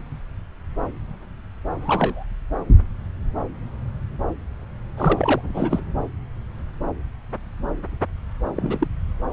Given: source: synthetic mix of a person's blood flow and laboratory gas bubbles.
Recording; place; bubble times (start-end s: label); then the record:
Doppler ultrasound of blood flow; subclavian vein
1.81-2.25 s: bubbles
4.97-5.41 s: bubbles
5.43-5.83 s: bubbles
8.55-8.87 s: bubbles
From the record:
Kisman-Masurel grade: 222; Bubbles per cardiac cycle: several, 3 to 8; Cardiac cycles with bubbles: 10 to 50%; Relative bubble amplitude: moderate (0.250 to 0.450); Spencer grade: 2 (many but less than half of the cardiac periods contain bubble signals, singularly or in groups); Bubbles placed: anywhere in the cardiac cycle